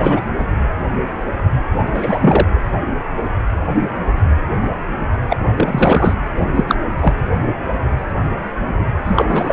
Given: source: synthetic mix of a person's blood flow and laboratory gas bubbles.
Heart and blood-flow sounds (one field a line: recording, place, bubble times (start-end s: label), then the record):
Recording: Doppler ultrasound of blood flow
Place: precordium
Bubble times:
0.00-0.21 s: bubbles
0.38-0.43 s: bubbles
1.94-2.47 s: bubbles
5.29-5.37 s: bubbles
5.56-6.16 s: bubbles
6.55-6.75 s: bubbles
7.01-7.13 s: bubbles
9.05-9.52 s: bubbles
From the record:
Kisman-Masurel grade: 223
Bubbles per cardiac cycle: several, 3 to 8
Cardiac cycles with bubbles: 10 to 50%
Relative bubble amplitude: loud (0.450 to 0.775)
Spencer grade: 2 (many but less than half of the cardiac periods contain bubble signals, singularly or in groups)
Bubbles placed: anywhere in the cardiac cycle